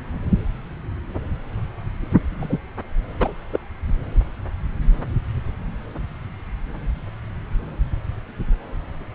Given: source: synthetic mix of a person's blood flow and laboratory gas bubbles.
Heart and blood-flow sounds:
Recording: Doppler ultrasound of blood flow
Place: subclavian vein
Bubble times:
2.40-2.58 s: bubbles
3.19-3.32 s: bubbles
3.52-3.58 s: bubbles
From the record:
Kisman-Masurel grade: 123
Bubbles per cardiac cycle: 1 to 2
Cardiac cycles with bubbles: 10 to 50%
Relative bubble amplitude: loud (0.450 to 0.775)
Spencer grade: 2 (many but less than half of the cardiac periods contain bubble signals, singularly or in groups)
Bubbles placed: anywhere in the cardiac cycle

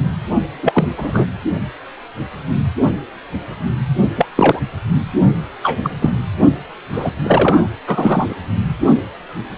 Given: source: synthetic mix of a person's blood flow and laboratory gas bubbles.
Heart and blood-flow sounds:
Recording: Doppler ultrasound of blood flow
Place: precordium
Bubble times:
0.62-1.26 s: bubbles
4.16-4.25 s: bubbles
4.36-4.60 s: bubbles
5.62-5.80 s: bubbles
5.83-5.91 s: bubbles
6.01-6.10 s: bubbles
6.92-7.12 s: bubbles
7.24-7.68 s: bubbles
7.87-8.35 s: bubbles
From the record:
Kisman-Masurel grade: 223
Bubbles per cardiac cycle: several, 3 to 8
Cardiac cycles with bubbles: 10 to 50%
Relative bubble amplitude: loud (0.450 to 0.775)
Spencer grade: 2 (many but less than half of the cardiac periods contain bubble signals, singularly or in groups)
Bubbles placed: only in the low amplitude regions of the cardiac cycle

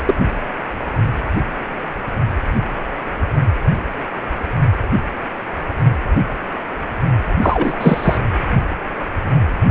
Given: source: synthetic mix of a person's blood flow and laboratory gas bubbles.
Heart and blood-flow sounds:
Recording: Doppler ultrasound of blood flow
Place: precordium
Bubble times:
0.06-0.14 s: bubbles
7.41-8.18 s: bubbles
From the record:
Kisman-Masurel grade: 223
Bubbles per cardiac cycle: several, 3 to 8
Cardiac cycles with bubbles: 10 to 50%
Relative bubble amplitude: loud (0.450 to 0.775)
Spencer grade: 2 (many but less than half of the cardiac periods contain bubble signals, singularly or in groups)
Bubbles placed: anywhere in the cardiac cycle

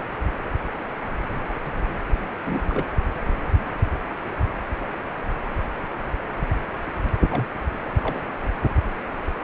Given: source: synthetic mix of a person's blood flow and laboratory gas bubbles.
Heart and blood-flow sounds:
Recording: Doppler ultrasound of blood flow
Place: precordium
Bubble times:
2.44-2.84 s: bubbles
7.29-7.48 s: bubbles
7.83-7.88 s: bubbles
8.02-8.21 s: bubbles
From the record:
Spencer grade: 2 (many but less than half of the cardiac periods contain bubble signals, singularly or in groups)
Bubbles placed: anywhere in the cardiac cycle

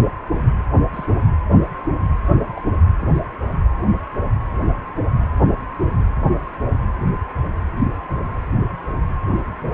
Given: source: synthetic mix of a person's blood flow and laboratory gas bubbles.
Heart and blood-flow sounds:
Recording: Doppler ultrasound of blood flow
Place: precordium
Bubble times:
0.94-1.05 s: bubbles
2.54-2.61 s: bubbles
3.01-3.08 s: bubbles
From the record:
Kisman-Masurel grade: 121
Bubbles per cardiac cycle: 1 to 2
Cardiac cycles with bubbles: 10 to 50%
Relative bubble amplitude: barely perceptible (0.100 to 0.250)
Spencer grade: 2 (many but less than half of the cardiac periods contain bubble signals, singularly or in groups)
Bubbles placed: anywhere in the cardiac cycle

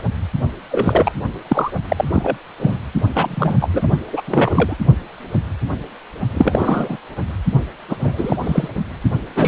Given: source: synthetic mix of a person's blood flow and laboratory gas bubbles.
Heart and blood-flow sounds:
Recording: Doppler ultrasound of blood flow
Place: precordium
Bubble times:
0.68-1.12 s: bubbles
1.49-1.71 s: bubbles
1.89-2.08 s: bubbles
2.12-2.38 s: bubbles
2.60-2.77 s: bubbles
3.15-3.54 s: bubbles
3.60-3.69 s: bubbles
3.73-3.90 s: bubbles
4.12-4.22 s: bubbles
4.26-4.77 s: bubbles
6.34-6.97 s: bubbles
7.89-7.96 s: bubbles
7.99-8.37 s: bubbles
8.44-8.68 s: bubbles
9.36-9.47 s: bubbles
From the record:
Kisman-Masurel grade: 233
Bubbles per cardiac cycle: several, 3 to 8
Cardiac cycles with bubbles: 50 to 99%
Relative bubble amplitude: loud (0.450 to 0.775)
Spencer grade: 3 (all of the cardiac periods contain showers or single bubble signals, but not dominating or overriding the cardiac motion signals)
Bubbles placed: only in the low amplitude regions of the cardiac cycle

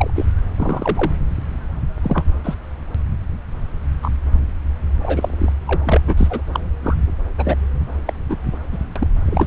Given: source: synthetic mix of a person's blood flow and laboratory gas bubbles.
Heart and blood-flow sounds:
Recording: Doppler ultrasound of blood flow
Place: subclavian vein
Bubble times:
0.00-0.10 s: bubbles
0.15-0.25 s: bubbles
0.56-1.12 s: bubbles
2.02-2.24 s: bubbles
2.44-2.55 s: bubbles
4.02-4.10 s: bubbles
5.03-5.52 s: bubbles
5.63-6.01 s: bubbles
6.07-6.42 s: bubbles
6.52-6.60 s: bubbles
6.82-6.94 s: bubbles
7.38-7.55 s: bubbles
8.05-8.13 s: bubbles
8.29-8.36 s: bubbles
8.72-8.79 s: bubbles
8.96-9.07 s: bubbles
9.25-9.47 s: bubbles
From the record:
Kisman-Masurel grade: 242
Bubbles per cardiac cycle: several, 3 to 8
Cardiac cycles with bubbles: 100%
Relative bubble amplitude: moderate (0.250 to 0.450)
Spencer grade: 3 (all of the cardiac periods contain showers or single bubble signals, but not dominating or overriding the cardiac motion signals)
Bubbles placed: anywhere in the cardiac cycle

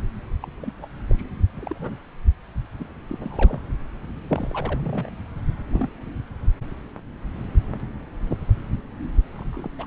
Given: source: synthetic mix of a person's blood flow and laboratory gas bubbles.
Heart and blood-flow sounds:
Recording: Doppler ultrasound of blood flow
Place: subclavian vein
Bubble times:
0.43-0.47 s: bubbles
0.63-0.72 s: bubbles
0.77-0.88 s: bubbles
1.07-1.23 s: bubbles
1.56-1.97 s: bubbles
2.79-2.87 s: bubbles
3.09-3.19 s: bubbles
3.21-3.61 s: bubbles
4.32-5.28 s: bubbles
5.71-5.89 s: bubbles
9.36-9.50 s: bubbles
9.53-9.69 s: bubbles
9.79-9.86 s: bubbles
From the record:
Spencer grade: 2 (many but less than half of the cardiac periods contain bubble signals, singularly or in groups)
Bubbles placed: anywhere in the cardiac cycle

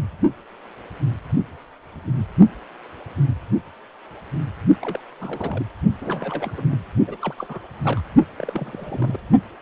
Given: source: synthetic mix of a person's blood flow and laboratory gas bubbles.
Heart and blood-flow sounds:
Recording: Doppler ultrasound of blood flow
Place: precordium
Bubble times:
4.83-5.01 s: bubbles
5.20-5.65 s: bubbles
6.01-6.77 s: bubbles
7.07-7.17 s: bubbles
7.21-7.34 s: bubbles
7.38-7.59 s: bubbles
7.84-8.00 s: bubbles
8.37-9.17 s: bubbles
From the record:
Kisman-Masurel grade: 221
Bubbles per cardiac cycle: several, 3 to 8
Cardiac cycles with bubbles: 10 to 50%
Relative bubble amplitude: barely perceptible (0.100 to 0.250)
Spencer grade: 2 (many but less than half of the cardiac periods contain bubble signals, singularly or in groups)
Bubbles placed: only in the low amplitude regions of the cardiac cycle

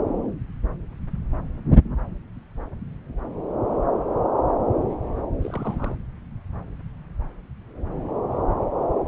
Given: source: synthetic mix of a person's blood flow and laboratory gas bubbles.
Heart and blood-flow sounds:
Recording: Doppler ultrasound of blood flow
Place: subclavian vein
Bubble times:
5.41-5.95 s: bubbles
From the record:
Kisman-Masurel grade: 211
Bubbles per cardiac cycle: several, 3 to 8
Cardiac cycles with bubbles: 1 to 10%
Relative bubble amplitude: barely perceptible (0.100 to 0.250)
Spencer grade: 1 (occasional bubble signal discernible with the cardiac motion signal, with majority of cardiac periods free of bubbles)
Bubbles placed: anywhere in the cardiac cycle

